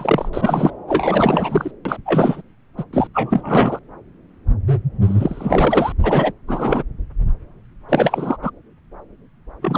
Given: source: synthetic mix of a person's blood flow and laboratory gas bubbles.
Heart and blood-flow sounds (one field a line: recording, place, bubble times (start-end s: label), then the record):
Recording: Doppler ultrasound of blood flow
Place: subclavian vein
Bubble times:
0.00-0.29 s: bubbles
0.33-0.70 s: bubbles
0.88-1.71 s: bubbles
1.85-1.97 s: bubbles
2.05-2.42 s: bubbles
2.77-2.84 s: bubbles
2.92-3.07 s: bubbles
3.14-3.79 s: bubbles
5.02-5.92 s: bubbles
6.02-6.33 s: bubbles
6.47-6.83 s: bubbles
7.89-8.37 s: bubbles
8.42-8.51 s: bubbles
9.61-9.78 s: bubbles
From the record:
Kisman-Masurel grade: 333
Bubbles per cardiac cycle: rolling drumbeat, 9 or more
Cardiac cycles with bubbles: 50 to 99%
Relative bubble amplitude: loud (0.450 to 0.775)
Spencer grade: 3 (all of the cardiac periods contain showers or single bubble signals, but not dominating or overriding the cardiac motion signals)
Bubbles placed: anywhere in the cardiac cycle